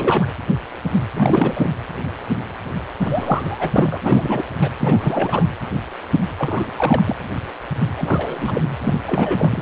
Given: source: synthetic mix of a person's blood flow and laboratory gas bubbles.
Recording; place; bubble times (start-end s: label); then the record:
Doppler ultrasound of blood flow; precordium
0.00-0.26 s: bubbles
1.14-1.71 s: bubbles
3.01-3.98 s: bubbles
4.01-4.45 s: bubbles
4.61-4.70 s: bubbles
4.80-5.46 s: bubbles
6.38-7.15 s: bubbles
7.96-8.62 s: bubbles
8.81-8.99 s: bubbles
9.04-9.62 s: bubbles
From the record:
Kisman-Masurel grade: 332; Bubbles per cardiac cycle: rolling drumbeat, 9 or more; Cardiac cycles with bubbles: 50 to 99%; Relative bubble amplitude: moderate (0.250 to 0.450); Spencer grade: 3 (all of the cardiac periods contain showers or single bubble signals, but not dominating or overriding the cardiac motion signals); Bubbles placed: anywhere in the cardiac cycle